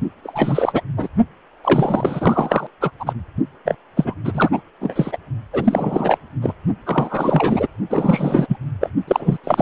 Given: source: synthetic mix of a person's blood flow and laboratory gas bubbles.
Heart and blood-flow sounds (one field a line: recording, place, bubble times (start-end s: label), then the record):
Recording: Doppler ultrasound of blood flow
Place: precordium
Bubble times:
0.23-0.81 s: bubbles
0.97-1.08 s: bubbles
1.64-2.67 s: bubbles
2.81-2.91 s: bubbles
3.00-3.13 s: bubbles
3.65-3.76 s: bubbles
3.96-4.14 s: bubbles
4.24-4.49 s: bubbles
4.52-4.61 s: bubbles
4.80-5.17 s: bubbles
5.52-6.17 s: bubbles
6.42-6.54 s: bubbles
6.85-7.67 s: bubbles
7.89-8.57 s: bubbles
8.80-8.90 s: bubbles
9.07-9.38 s: bubbles
9.44-9.62 s: bubbles
From the record:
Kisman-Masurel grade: 343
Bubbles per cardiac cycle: rolling drumbeat, 9 or more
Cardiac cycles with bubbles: 100%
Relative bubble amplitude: loud (0.450 to 0.775)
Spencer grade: 3 (all of the cardiac periods contain showers or single bubble signals, but not dominating or overriding the cardiac motion signals)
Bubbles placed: only in the low amplitude regions of the cardiac cycle